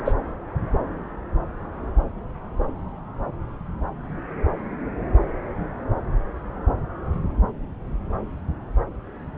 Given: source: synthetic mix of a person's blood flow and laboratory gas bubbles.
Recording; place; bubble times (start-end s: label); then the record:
Doppler ultrasound of blood flow; subclavian vein
0.04-0.14 s: bubbles
From the record:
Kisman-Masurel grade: 212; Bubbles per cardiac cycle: several, 3 to 8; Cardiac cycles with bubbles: 1 to 10%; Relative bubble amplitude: moderate (0.250 to 0.450); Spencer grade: 1 (occasional bubble signal discernible with the cardiac motion signal, with majority of cardiac periods free of bubbles); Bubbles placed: anywhere in the cardiac cycle